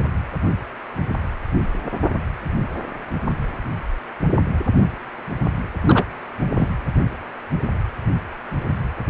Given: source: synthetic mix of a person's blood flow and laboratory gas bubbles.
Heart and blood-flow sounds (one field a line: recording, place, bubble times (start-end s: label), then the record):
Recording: Doppler ultrasound of blood flow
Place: precordium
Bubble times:
5.85-6.04 s: bubbles
6.57-6.69 s: bubbles
From the record:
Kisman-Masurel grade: 223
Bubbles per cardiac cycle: several, 3 to 8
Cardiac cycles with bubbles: 10 to 50%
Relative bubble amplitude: loud (0.450 to 0.775)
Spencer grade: 2 (many but less than half of the cardiac periods contain bubble signals, singularly or in groups)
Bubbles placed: anywhere in the cardiac cycle